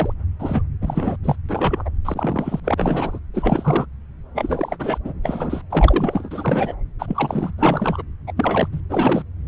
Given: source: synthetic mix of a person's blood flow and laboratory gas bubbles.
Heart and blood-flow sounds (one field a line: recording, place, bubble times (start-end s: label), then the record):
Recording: Doppler ultrasound of blood flow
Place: subclavian vein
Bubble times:
0.00-0.14 s: bubbles
0.39-0.62 s: bubbles
0.81-1.17 s: bubbles
1.23-1.36 s: bubbles
1.48-1.82 s: bubbles
1.85-1.90 s: bubbles
2.04-2.60 s: bubbles
2.64-2.75 s: bubbles
2.77-3.19 s: bubbles
3.33-3.85 s: bubbles
4.35-4.98 s: bubbles
5.04-5.13 s: bubbles
5.23-5.62 s: bubbles
5.70-6.75 s: bubbles
6.99-7.52 s: bubbles
7.58-8.02 s: bubbles
8.27-8.33 s: bubbles
8.37-8.68 s: bubbles
8.72-8.80 s: bubbles
8.89-9.24 s: bubbles
From the record:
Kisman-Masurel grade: 342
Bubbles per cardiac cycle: rolling drumbeat, 9 or more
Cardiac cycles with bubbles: 100%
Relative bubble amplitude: moderate (0.250 to 0.450)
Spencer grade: 3 (all of the cardiac periods contain showers or single bubble signals, but not dominating or overriding the cardiac motion signals)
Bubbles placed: anywhere in the cardiac cycle